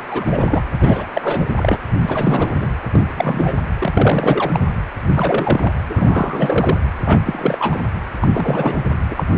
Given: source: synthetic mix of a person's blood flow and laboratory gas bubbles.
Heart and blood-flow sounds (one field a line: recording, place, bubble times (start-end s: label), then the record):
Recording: Doppler ultrasound of blood flow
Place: precordium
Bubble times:
0.00-0.03 s: bubbles
0.08-0.63 s: bubbles
0.80-1.06 s: bubbles
1.13-1.46 s: bubbles
1.56-1.77 s: bubbles
2.00-2.71 s: bubbles
2.92-3.55 s: bubbles
3.80-4.60 s: bubbles
5.15-5.72 s: bubbles
5.89-6.78 s: bubbles
7.04-7.81 s: bubbles
8.21-8.30 s: bubbles
8.33-8.83 s: bubbles
9.11-9.24 s: bubbles
From the record:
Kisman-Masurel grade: 342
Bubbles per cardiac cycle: rolling drumbeat, 9 or more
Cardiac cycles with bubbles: 100%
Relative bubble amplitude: moderate (0.250 to 0.450)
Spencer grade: 3 (all of the cardiac periods contain showers or single bubble signals, but not dominating or overriding the cardiac motion signals)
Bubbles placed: anywhere in the cardiac cycle